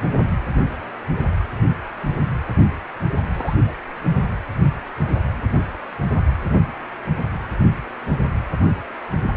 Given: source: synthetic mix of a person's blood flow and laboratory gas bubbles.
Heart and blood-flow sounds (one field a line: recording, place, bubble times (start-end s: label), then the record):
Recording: Doppler ultrasound of blood flow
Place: precordium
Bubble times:
3.34-3.56 s: bubbles
3.66-3.73 s: bubbles
From the record:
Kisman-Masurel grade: 111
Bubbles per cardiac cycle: 1 to 2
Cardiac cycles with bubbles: 1 to 10%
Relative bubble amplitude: barely perceptible (0.100 to 0.250)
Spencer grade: 1 (occasional bubble signal discernible with the cardiac motion signal, with majority of cardiac periods free of bubbles)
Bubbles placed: anywhere in the cardiac cycle